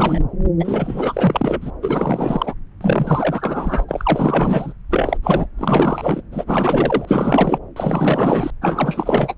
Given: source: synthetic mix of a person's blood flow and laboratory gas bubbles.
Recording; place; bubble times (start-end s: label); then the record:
Doppler ultrasound of blood flow; subclavian vein
0.00-0.21 s: bubbles
0.59-1.71 s: bubbles
1.81-2.54 s: bubbles
2.81-3.85 s: bubbles
3.88-4.74 s: bubbles
4.90-5.17 s: bubbles
5.23-5.47 s: bubbles
5.58-6.23 s: bubbles
6.31-7.59 s: bubbles
7.76-8.50 s: bubbles
8.61-9.34 s: bubbles
From the record:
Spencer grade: 4 (maximum detectable bubble signal sounding continuously throughout systole and diastole of every cardiac period, and overriding the amplitude of the normal cardiac signals); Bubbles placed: anywhere in the cardiac cycle